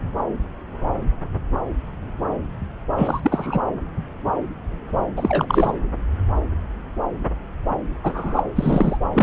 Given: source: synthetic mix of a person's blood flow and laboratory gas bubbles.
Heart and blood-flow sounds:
Doppler ultrasound of blood flow; subclavian vein
2.97-3.59 s: bubbles
5.16-5.76 s: bubbles
8.03-8.43 s: bubbles
8.56-8.97 s: bubbles
9.13-9.23 s: bubbles
From the record:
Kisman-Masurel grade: 223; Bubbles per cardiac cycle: several, 3 to 8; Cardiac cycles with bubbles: 10 to 50%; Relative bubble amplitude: loud (0.450 to 0.775); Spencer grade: 2 (many but less than half of the cardiac periods contain bubble signals, singularly or in groups); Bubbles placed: anywhere in the cardiac cycle

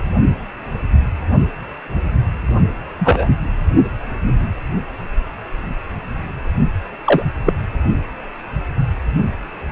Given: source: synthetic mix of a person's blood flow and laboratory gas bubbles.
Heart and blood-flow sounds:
Doppler ultrasound of blood flow; precordium
2.99-3.27 s: bubbles
7.04-7.22 s: bubbles
7.45-7.53 s: bubbles
From the record:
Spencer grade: 2 (many but less than half of the cardiac periods contain bubble signals, singularly or in groups); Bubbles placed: only in the low amplitude regions of the cardiac cycle

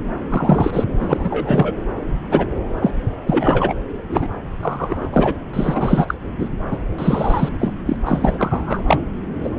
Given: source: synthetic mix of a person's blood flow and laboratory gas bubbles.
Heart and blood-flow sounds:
Doppler ultrasound of blood flow; subclavian vein
0.30-0.85 s: bubbles
1.00-1.74 s: bubbles
2.31-2.48 s: bubbles
2.81-2.93 s: bubbles
3.27-3.74 s: bubbles
4.09-4.27 s: bubbles
4.62-5.07 s: bubbles
5.12-5.33 s: bubbles
5.53-6.14 s: bubbles
6.38-6.49 s: bubbles
6.71-6.78 s: bubbles
6.98-7.49 s: bubbles
7.59-7.72 s: bubbles
7.85-7.96 s: bubbles
8.05-8.83 s: bubbles
8.87-8.99 s: bubbles
9.43-9.50 s: bubbles
From the record:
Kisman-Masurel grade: 243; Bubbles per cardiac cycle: several, 3 to 8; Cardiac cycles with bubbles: 100%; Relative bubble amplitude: loud (0.450 to 0.775); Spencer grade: 3 (all of the cardiac periods contain showers or single bubble signals, but not dominating or overriding the cardiac motion signals); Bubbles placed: anywhere in the cardiac cycle

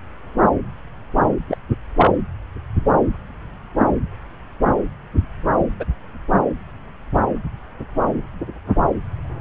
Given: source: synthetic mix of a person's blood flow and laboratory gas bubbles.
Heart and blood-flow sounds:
Doppler ultrasound of blood flow; subclavian vein
1.48-1.58 s: bubbles
1.97-2.12 s: bubbles
5.79-5.85 s: bubbles
From the record:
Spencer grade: 2 (many but less than half of the cardiac periods contain bubble signals, singularly or in groups); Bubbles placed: anywhere in the cardiac cycle

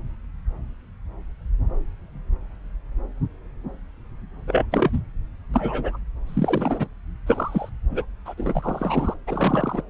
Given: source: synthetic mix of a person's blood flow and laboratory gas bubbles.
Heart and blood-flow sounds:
Doppler ultrasound of blood flow; subclavian vein
4.48-4.66 s: bubbles
4.71-5.00 s: bubbles
5.54-5.98 s: bubbles
6.27-6.88 s: bubbles
7.27-7.70 s: bubbles
7.90-8.05 s: bubbles
8.26-8.34 s: bubbles
8.37-9.14 s: bubbles
9.27-9.82 s: bubbles
From the record:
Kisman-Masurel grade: 232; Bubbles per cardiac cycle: several, 3 to 8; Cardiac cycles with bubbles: 50 to 99%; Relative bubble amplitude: moderate (0.250 to 0.450); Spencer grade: 3 (all of the cardiac periods contain showers or single bubble signals, but not dominating or overriding the cardiac motion signals); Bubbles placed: anywhere in the cardiac cycle

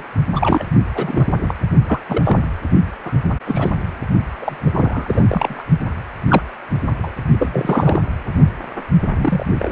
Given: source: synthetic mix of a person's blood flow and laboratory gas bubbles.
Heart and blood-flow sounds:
Doppler ultrasound of blood flow; precordium
0.00-0.04 s: bubbles
0.35-0.66 s: bubbles
0.94-1.27 s: bubbles
1.42-1.54 s: bubbles
1.87-2.00 s: bubbles
2.08-2.45 s: bubbles
3.04-3.12 s: bubbles
3.46-3.71 s: bubbles
4.42-4.57 s: bubbles
4.66-4.71 s: bubbles
4.74-5.62 s: bubbles
6.28-6.42 s: bubbles
7.03-7.10 s: bubbles
7.39-8.00 s: bubbles
9.16-9.44 s: bubbles
9.59-9.72 s: bubbles
From the record:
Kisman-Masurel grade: 242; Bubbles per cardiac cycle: several, 3 to 8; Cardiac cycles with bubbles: 100%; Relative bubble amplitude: moderate (0.250 to 0.450); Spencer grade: 3 (all of the cardiac periods contain showers or single bubble signals, but not dominating or overriding the cardiac motion signals); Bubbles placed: only in the low amplitude regions of the cardiac cycle

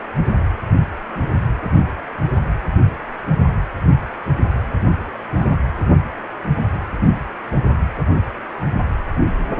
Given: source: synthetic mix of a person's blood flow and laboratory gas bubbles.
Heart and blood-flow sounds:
Doppler ultrasound of blood flow; precordium
5.38-5.53 s: bubbles
From the record:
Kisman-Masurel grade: 111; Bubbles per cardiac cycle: 1 to 2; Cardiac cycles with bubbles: 1 to 10%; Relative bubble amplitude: barely perceptible (0.100 to 0.250); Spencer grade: 1 (occasional bubble signal discernible with the cardiac motion signal, with majority of cardiac periods free of bubbles); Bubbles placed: anywhere in the cardiac cycle

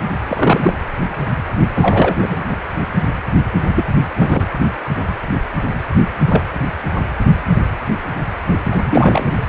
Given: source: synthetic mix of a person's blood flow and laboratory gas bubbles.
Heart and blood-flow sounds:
Doppler ultrasound of blood flow; precordium
0.28-0.73 s: bubbles
1.74-2.16 s: bubbles
2.22-2.37 s: bubbles
2.47-2.57 s: bubbles
3.75-3.84 s: bubbles
4.16-4.46 s: bubbles
6.28-6.42 s: bubbles
8.71-8.78 s: bubbles
8.90-9.44 s: bubbles
From the record:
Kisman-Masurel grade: 223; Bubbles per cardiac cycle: several, 3 to 8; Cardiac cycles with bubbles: 10 to 50%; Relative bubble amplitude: loud (0.450 to 0.775); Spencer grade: 2 (many but less than half of the cardiac periods contain bubble signals, singularly or in groups); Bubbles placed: anywhere in the cardiac cycle

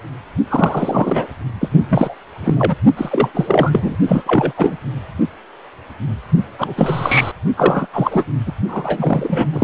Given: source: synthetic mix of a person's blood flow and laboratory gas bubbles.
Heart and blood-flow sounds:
Doppler ultrasound of blood flow; precordium
0.48-1.27 s: bubbles
1.60-1.69 s: bubbles
1.89-2.15 s: bubbles
2.40-2.75 s: bubbles
2.96-3.96 s: bubbles
4.07-4.24 s: bubbles
4.26-4.53 s: bubbles
4.57-4.78 s: bubbles
6.58-7.32 s: bubbles
7.57-7.87 s: bubbles
7.93-8.25 s: bubbles
8.46-8.52 s: bubbles
8.68-9.48 s: bubbles
9.51-9.64 s: bubbles
From the record:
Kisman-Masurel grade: 333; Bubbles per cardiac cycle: rolling drumbeat, 9 or more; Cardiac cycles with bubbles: 50 to 99%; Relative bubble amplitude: loud (0.450 to 0.775); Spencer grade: 3 (all of the cardiac periods contain showers or single bubble signals, but not dominating or overriding the cardiac motion signals); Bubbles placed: only in the low amplitude regions of the cardiac cycle

